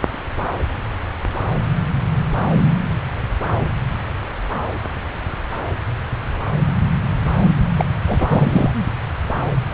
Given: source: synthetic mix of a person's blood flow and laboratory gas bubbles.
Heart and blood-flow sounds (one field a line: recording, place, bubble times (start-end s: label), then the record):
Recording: Doppler ultrasound of blood flow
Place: subclavian vein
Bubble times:
7.77-7.85 s: bubbles
8.06-8.71 s: bubbles
From the record:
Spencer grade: 1 (occasional bubble signal discernible with the cardiac motion signal, with majority of cardiac periods free of bubbles)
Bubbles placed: anywhere in the cardiac cycle